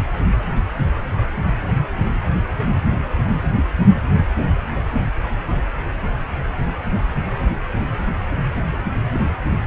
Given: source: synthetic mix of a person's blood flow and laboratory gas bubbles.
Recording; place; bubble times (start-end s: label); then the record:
Doppler ultrasound of blood flow; precordium
9.13-9.21 s: bubbles
From the record:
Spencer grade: 1 (occasional bubble signal discernible with the cardiac motion signal, with majority of cardiac periods free of bubbles); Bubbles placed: anywhere in the cardiac cycle